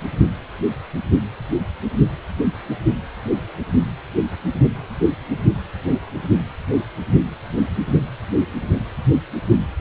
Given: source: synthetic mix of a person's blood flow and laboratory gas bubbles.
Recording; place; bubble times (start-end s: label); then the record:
Doppler ultrasound of blood flow; precordium
no bubbles
From the record:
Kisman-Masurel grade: 000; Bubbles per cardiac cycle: 0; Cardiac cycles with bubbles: 0%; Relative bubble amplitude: no bubbles discernible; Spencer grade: 0 (complete lack of bubble signals)